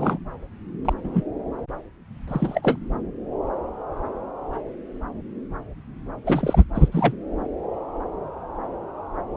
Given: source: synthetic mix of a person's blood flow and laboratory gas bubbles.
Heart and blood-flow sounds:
Doppler ultrasound of blood flow; subclavian vein
0.00-0.17 s: bubbles
0.85-0.93 s: bubbles
1.03-1.24 s: bubbles
2.27-2.77 s: bubbles
6.24-6.63 s: bubbles
6.74-6.88 s: bubbles
6.92-7.14 s: bubbles
From the record:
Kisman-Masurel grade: 222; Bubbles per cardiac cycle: several, 3 to 8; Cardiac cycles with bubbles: 10 to 50%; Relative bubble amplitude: moderate (0.250 to 0.450); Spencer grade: 2 (many but less than half of the cardiac periods contain bubble signals, singularly or in groups); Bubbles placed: anywhere in the cardiac cycle

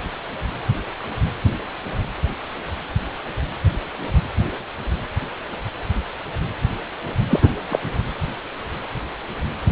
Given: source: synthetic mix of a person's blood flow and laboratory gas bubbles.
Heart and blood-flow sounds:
Doppler ultrasound of blood flow; precordium
7.28-7.51 s: bubbles
7.69-7.79 s: bubbles
From the record:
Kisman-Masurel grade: 213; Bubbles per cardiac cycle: several, 3 to 8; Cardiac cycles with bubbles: 1 to 10%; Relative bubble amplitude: loud (0.450 to 0.775); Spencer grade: 1 (occasional bubble signal discernible with the cardiac motion signal, with majority of cardiac periods free of bubbles); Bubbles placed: anywhere in the cardiac cycle

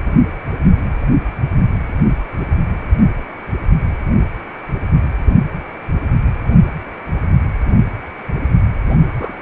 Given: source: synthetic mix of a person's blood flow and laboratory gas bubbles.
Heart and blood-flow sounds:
Doppler ultrasound of blood flow; precordium
8.89-8.96 s: bubbles
9.18-9.34 s: bubbles
From the record:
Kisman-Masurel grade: 112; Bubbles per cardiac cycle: 1 to 2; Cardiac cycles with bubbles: 1 to 10%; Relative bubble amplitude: moderate (0.250 to 0.450); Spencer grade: 1 (occasional bubble signal discernible with the cardiac motion signal, with majority of cardiac periods free of bubbles); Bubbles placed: anywhere in the cardiac cycle

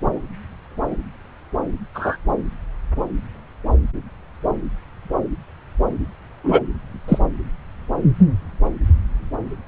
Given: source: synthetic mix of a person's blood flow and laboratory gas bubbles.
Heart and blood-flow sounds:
Doppler ultrasound of blood flow; subclavian vein
1.94-2.17 s: bubbles
6.44-6.62 s: bubbles
7.08-7.19 s: bubbles
From the record:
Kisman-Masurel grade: 123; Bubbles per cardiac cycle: 1 to 2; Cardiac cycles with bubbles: 10 to 50%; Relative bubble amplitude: loud (0.450 to 0.775); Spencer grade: 2 (many but less than half of the cardiac periods contain bubble signals, singularly or in groups); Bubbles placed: anywhere in the cardiac cycle

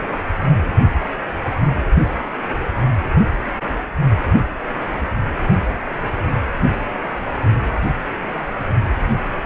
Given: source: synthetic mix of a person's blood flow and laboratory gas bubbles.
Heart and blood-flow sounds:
Doppler ultrasound of blood flow; precordium
9.06-9.34 s: bubbles
From the record:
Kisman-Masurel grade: 111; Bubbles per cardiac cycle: 1 to 2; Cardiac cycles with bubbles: 1 to 10%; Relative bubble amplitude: barely perceptible (0.100 to 0.250); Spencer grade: 1 (occasional bubble signal discernible with the cardiac motion signal, with majority of cardiac periods free of bubbles); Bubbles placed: only in the low amplitude regions of the cardiac cycle

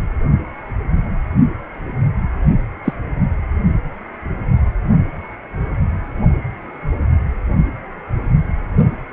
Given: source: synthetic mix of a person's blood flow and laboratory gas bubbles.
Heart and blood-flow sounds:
Doppler ultrasound of blood flow; precordium
2.84-2.93 s: bubbles
From the record:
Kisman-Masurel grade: 113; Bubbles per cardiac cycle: 1 to 2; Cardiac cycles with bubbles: 1 to 10%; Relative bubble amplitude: loud (0.450 to 0.775); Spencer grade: 1 (occasional bubble signal discernible with the cardiac motion signal, with majority of cardiac periods free of bubbles); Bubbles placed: only in the low amplitude regions of the cardiac cycle

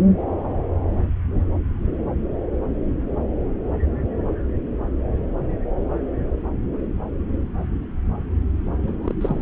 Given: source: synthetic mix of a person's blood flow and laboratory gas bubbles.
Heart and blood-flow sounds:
Doppler ultrasound of blood flow; subclavian vein
8.82-8.97 s: bubbles
9.03-9.15 s: bubbles
9.21-9.42 s: bubbles
From the record:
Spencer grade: 1 (occasional bubble signal discernible with the cardiac motion signal, with majority of cardiac periods free of bubbles); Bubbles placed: anywhere in the cardiac cycle

